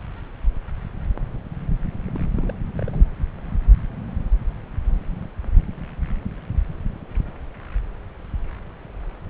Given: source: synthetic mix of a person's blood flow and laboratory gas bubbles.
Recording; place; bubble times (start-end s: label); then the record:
Doppler ultrasound of blood flow; subclavian vein
2.08-2.11 s: bubbles
2.13-2.26 s: bubbles
2.29-2.54 s: bubbles
2.77-3.06 s: bubbles
From the record:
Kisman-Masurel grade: 211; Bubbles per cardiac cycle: several, 3 to 8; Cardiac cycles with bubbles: 1 to 10%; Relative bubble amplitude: barely perceptible (0.100 to 0.250); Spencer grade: 1 (occasional bubble signal discernible with the cardiac motion signal, with majority of cardiac periods free of bubbles); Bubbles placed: anywhere in the cardiac cycle